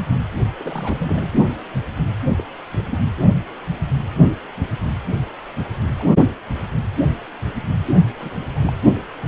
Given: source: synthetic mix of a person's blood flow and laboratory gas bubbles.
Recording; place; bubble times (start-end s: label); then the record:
Doppler ultrasound of blood flow; precordium
0.59-1.29 s: bubbles
2.38-2.44 s: bubbles
2.73-2.98 s: bubbles
5.64-5.69 s: bubbles
5.87-5.93 s: bubbles
5.97-6.14 s: bubbles
8.20-8.29 s: bubbles
8.55-8.73 s: bubbles
From the record:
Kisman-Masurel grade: 221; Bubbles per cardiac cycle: several, 3 to 8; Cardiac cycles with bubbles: 10 to 50%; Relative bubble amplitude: barely perceptible (0.100 to 0.250); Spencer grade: 2 (many but less than half of the cardiac periods contain bubble signals, singularly or in groups); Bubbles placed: only in the low amplitude regions of the cardiac cycle